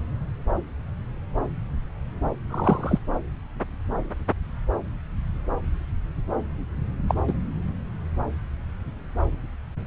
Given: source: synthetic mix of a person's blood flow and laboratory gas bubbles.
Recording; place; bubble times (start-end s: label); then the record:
Doppler ultrasound of blood flow; subclavian vein
2.49-2.99 s: bubbles
7.08-7.14 s: bubbles
7.27-7.33 s: bubbles
From the record:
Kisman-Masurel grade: 113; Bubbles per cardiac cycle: 1 to 2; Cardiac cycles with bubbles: 1 to 10%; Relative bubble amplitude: loud (0.450 to 0.775); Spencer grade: 1 (occasional bubble signal discernible with the cardiac motion signal, with majority of cardiac periods free of bubbles); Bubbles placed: anywhere in the cardiac cycle